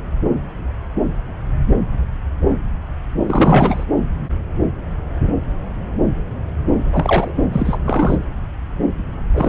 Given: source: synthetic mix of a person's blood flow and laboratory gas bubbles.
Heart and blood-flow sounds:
Doppler ultrasound of blood flow; subclavian vein
3.27-3.84 s: bubbles
6.92-7.32 s: bubbles
7.52-7.78 s: bubbles
7.84-8.16 s: bubbles
9.32-9.49 s: bubbles
From the record:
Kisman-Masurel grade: 223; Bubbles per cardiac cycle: several, 3 to 8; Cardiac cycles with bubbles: 10 to 50%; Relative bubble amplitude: loud (0.450 to 0.775); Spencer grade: 2 (many but less than half of the cardiac periods contain bubble signals, singularly or in groups); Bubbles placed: anywhere in the cardiac cycle

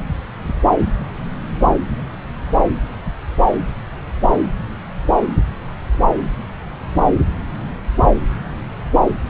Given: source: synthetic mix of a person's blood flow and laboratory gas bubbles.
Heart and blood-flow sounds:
Doppler ultrasound of blood flow; subclavian vein
0.98-1.06 s: bubbles
From the record:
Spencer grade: 2 (many but less than half of the cardiac periods contain bubble signals, singularly or in groups); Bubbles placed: anywhere in the cardiac cycle

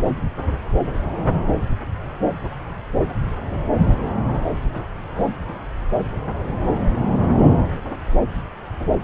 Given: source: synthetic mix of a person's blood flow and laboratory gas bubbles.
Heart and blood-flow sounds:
Doppler ultrasound of blood flow; subclavian vein
no bubbles
From the record:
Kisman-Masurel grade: 000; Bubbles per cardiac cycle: 0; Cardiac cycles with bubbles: 0%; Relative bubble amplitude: no bubbles discernible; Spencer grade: 0 (complete lack of bubble signals)

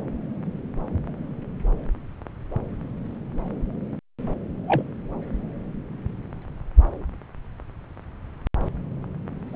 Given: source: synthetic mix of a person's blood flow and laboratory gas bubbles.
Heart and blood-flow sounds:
Doppler ultrasound of blood flow; subclavian vein
4.67-4.83 s: bubbles
9.46-9.55 s: bubbles
From the record:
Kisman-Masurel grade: 122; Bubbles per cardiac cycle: 1 to 2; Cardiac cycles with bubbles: 10 to 50%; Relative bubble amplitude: moderate (0.250 to 0.450); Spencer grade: 2 (many but less than half of the cardiac periods contain bubble signals, singularly or in groups); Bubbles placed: anywhere in the cardiac cycle

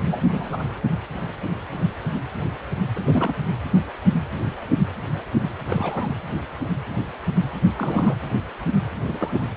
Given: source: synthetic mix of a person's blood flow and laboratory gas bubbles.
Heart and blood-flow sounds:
Doppler ultrasound of blood flow; precordium
0.06-0.27 s: bubbles
0.30-0.65 s: bubbles
2.96-3.35 s: bubbles
5.65-6.17 s: bubbles
7.77-8.16 s: bubbles
9.04-9.49 s: bubbles
From the record:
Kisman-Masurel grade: 221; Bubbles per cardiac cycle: several, 3 to 8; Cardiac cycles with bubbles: 10 to 50%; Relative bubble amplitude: barely perceptible (0.100 to 0.250); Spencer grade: 2 (many but less than half of the cardiac periods contain bubble signals, singularly or in groups); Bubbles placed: anywhere in the cardiac cycle

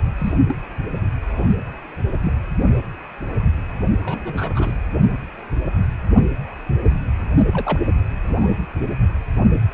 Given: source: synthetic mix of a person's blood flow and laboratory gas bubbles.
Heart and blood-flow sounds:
Doppler ultrasound of blood flow; precordium
0.18-0.33 s: bubbles
0.46-0.59 s: bubbles
1.22-1.49 s: bubbles
2.23-2.33 s: bubbles
4.02-4.76 s: bubbles
7.52-7.79 s: bubbles
8.26-8.48 s: bubbles
9.51-9.59 s: bubbles
From the record:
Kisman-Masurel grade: 232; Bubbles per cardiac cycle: several, 3 to 8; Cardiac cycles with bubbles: 50 to 99%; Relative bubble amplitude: moderate (0.250 to 0.450); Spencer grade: 3 (all of the cardiac periods contain showers or single bubble signals, but not dominating or overriding the cardiac motion signals); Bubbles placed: only in the low amplitude regions of the cardiac cycle

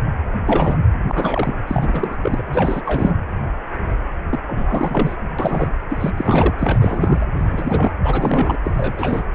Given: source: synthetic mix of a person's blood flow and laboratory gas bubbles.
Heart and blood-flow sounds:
Doppler ultrasound of blood flow; precordium
0.46-0.77 s: bubbles
1.08-1.54 s: bubbles
1.67-2.17 s: bubbles
2.23-2.43 s: bubbles
2.52-2.81 s: bubbles
2.85-3.14 s: bubbles
4.29-4.39 s: bubbles
4.47-5.16 s: bubbles
5.38-5.72 s: bubbles
5.90-6.10 s: bubbles
6.17-6.55 s: bubbles
6.58-6.78 s: bubbles
6.80-7.26 s: bubbles
7.37-7.92 s: bubbles
8.03-8.57 s: bubbles
8.64-9.24 s: bubbles
From the record:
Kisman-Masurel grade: 332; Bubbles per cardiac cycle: rolling drumbeat, 9 or more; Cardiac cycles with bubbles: 50 to 99%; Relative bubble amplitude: moderate (0.250 to 0.450); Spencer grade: 3 (all of the cardiac periods contain showers or single bubble signals, but not dominating or overriding the cardiac motion signals); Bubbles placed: anywhere in the cardiac cycle

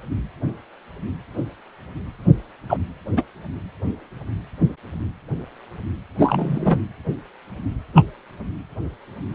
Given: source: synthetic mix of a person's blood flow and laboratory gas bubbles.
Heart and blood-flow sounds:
Doppler ultrasound of blood flow; precordium
2.69-2.77 s: bubbles
3.17-3.23 s: bubbles
6.18-6.80 s: bubbles
7.95-8.04 s: bubbles
From the record:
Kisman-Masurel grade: 123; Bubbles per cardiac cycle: 1 to 2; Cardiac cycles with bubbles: 10 to 50%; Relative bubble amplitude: loud (0.450 to 0.775); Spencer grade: 2 (many but less than half of the cardiac periods contain bubble signals, singularly or in groups); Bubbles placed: anywhere in the cardiac cycle

